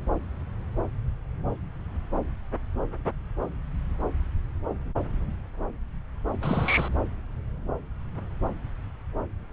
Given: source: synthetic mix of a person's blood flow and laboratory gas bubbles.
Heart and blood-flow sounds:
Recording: Doppler ultrasound of blood flow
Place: subclavian vein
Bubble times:
6.42-6.89 s: bubbles
From the record:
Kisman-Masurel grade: 111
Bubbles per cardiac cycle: 1 to 2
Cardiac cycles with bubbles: 1 to 10%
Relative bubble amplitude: barely perceptible (0.100 to 0.250)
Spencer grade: 1 (occasional bubble signal discernible with the cardiac motion signal, with majority of cardiac periods free of bubbles)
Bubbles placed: anywhere in the cardiac cycle

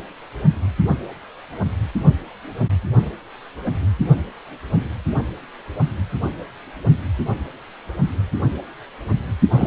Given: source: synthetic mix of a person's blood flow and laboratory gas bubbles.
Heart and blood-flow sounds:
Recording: Doppler ultrasound of blood flow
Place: precordium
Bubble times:
9.51-9.66 s: bubbles
From the record:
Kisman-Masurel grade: 213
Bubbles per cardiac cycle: several, 3 to 8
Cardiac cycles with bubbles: 1 to 10%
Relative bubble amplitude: loud (0.450 to 0.775)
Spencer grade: 1 (occasional bubble signal discernible with the cardiac motion signal, with majority of cardiac periods free of bubbles)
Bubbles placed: only in the low amplitude regions of the cardiac cycle

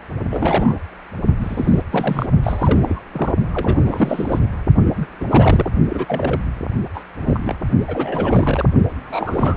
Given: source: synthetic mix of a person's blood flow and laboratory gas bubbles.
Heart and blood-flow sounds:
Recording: Doppler ultrasound of blood flow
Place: precordium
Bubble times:
0.30-0.77 s: bubbles
1.40-1.82 s: bubbles
1.91-2.26 s: bubbles
2.43-3.01 s: bubbles
3.12-3.35 s: bubbles
3.54-4.40 s: bubbles
4.86-5.06 s: bubbles
5.20-5.25 s: bubbles
5.29-5.70 s: bubbles
5.89-6.41 s: bubbles
6.94-7.03 s: bubbles
7.20-7.56 s: bubbles
7.87-8.65 s: bubbles
9.03-9.57 s: bubbles
From the record:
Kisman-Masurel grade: 342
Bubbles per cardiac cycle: rolling drumbeat, 9 or more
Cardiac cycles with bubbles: 100%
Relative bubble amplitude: moderate (0.250 to 0.450)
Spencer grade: 3 (all of the cardiac periods contain showers or single bubble signals, but not dominating or overriding the cardiac motion signals)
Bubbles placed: only in the low amplitude regions of the cardiac cycle

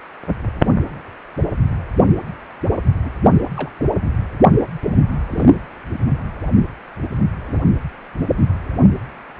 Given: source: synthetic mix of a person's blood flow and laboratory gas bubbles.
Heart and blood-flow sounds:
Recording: Doppler ultrasound of blood flow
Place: precordium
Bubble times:
3.04-3.10 s: bubbles
3.56-3.70 s: bubbles
3.79-3.84 s: bubbles
5.30-5.53 s: bubbles
7.46-7.62 s: bubbles
From the record:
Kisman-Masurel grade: 121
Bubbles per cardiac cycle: 1 to 2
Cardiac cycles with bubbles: 10 to 50%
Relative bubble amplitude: barely perceptible (0.100 to 0.250)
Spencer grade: 2 (many but less than half of the cardiac periods contain bubble signals, singularly or in groups)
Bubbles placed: only in the low amplitude regions of the cardiac cycle

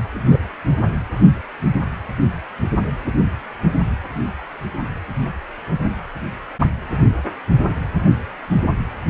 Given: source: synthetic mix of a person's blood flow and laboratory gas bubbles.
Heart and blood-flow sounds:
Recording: Doppler ultrasound of blood flow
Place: precordium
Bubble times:
0.30-0.39 s: bubbles
From the record:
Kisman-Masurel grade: 112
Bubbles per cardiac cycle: 1 to 2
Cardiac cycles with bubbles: 1 to 10%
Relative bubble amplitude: moderate (0.250 to 0.450)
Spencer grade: 1 (occasional bubble signal discernible with the cardiac motion signal, with majority of cardiac periods free of bubbles)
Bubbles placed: only in the low amplitude regions of the cardiac cycle

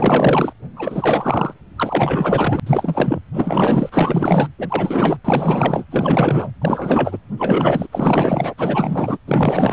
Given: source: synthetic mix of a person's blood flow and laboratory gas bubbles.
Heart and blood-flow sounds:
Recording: Doppler ultrasound of blood flow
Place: precordium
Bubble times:
0.00-0.53 s: bubbles
0.76-1.54 s: bubbles
1.76-2.60 s: bubbles
2.66-3.21 s: bubbles
3.33-4.48 s: bubbles
4.58-5.17 s: bubbles
5.25-5.84 s: bubbles
5.90-6.51 s: bubbles
6.61-7.18 s: bubbles
7.37-7.87 s: bubbles
7.92-8.54 s: bubbles
8.58-9.18 s: bubbles
9.27-9.73 s: bubbles
From the record:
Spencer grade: 4 (maximum detectable bubble signal sounding continuously throughout systole and diastole of every cardiac period, and overriding the amplitude of the normal cardiac signals)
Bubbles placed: anywhere in the cardiac cycle

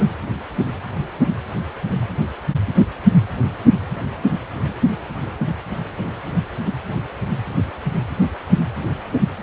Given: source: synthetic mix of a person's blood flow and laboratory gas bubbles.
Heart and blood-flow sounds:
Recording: Doppler ultrasound of blood flow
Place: precordium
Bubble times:
0.00-0.04 s: bubbles
From the record:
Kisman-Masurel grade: 112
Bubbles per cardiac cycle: 1 to 2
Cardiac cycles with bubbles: 1 to 10%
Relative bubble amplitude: moderate (0.250 to 0.450)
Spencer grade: 1 (occasional bubble signal discernible with the cardiac motion signal, with majority of cardiac periods free of bubbles)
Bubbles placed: anywhere in the cardiac cycle

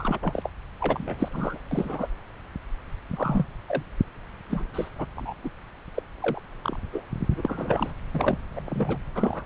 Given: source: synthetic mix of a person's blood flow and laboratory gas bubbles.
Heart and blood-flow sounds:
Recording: Doppler ultrasound of blood flow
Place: subclavian vein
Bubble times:
0.00-0.19 s: bubbles
0.22-0.49 s: bubbles
0.80-1.59 s: bubbles
1.71-2.09 s: bubbles
3.12-3.45 s: bubbles
3.68-3.83 s: bubbles
4.50-4.64 s: bubbles
4.74-4.89 s: bubbles
4.99-5.05 s: bubbles
5.16-5.34 s: bubbles
5.44-5.50 s: bubbles
5.95-6.03 s: bubbles
6.21-6.41 s: bubbles
6.63-6.77 s: bubbles
6.92-7.03 s: bubbles
7.29-7.93 s: bubbles
8.14-8.38 s: bubbles
8.56-8.61 s: bubbles
8.66-9.00 s: bubbles
9.15-9.46 s: bubbles
From the record:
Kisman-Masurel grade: 232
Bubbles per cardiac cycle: several, 3 to 8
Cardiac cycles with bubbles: 50 to 99%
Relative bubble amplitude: moderate (0.250 to 0.450)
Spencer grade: 3 (all of the cardiac periods contain showers or single bubble signals, but not dominating or overriding the cardiac motion signals)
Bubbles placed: anywhere in the cardiac cycle

